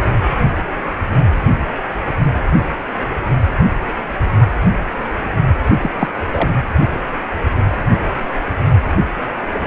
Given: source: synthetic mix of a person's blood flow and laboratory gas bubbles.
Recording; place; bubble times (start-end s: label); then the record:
Doppler ultrasound of blood flow; precordium
5.81-5.90 s: bubbles
5.99-6.08 s: bubbles
6.31-6.49 s: bubbles
From the record:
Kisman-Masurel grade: 212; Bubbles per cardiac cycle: several, 3 to 8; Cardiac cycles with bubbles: 1 to 10%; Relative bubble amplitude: moderate (0.250 to 0.450); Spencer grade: 1 (occasional bubble signal discernible with the cardiac motion signal, with majority of cardiac periods free of bubbles); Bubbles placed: only in the low amplitude regions of the cardiac cycle